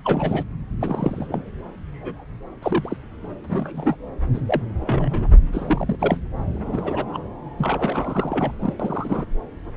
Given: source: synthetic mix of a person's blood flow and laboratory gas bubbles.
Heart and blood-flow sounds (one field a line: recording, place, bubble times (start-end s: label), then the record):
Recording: Doppler ultrasound of blood flow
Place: subclavian vein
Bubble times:
0.04-0.45 s: bubbles
0.80-1.44 s: bubbles
1.94-2.25 s: bubbles
2.62-2.96 s: bubbles
3.44-3.96 s: bubbles
4.34-4.41 s: bubbles
4.47-4.62 s: bubbles
4.81-5.29 s: bubbles
5.32-5.37 s: bubbles
5.52-5.97 s: bubbles
5.99-6.18 s: bubbles
6.54-7.04 s: bubbles
7.13-7.18 s: bubbles
7.58-8.52 s: bubbles
8.59-8.74 s: bubbles
8.79-9.25 s: bubbles
From the record:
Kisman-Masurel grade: 242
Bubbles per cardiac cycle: several, 3 to 8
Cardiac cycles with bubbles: 100%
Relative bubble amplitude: moderate (0.250 to 0.450)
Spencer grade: 3 (all of the cardiac periods contain showers or single bubble signals, but not dominating or overriding the cardiac motion signals)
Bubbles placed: anywhere in the cardiac cycle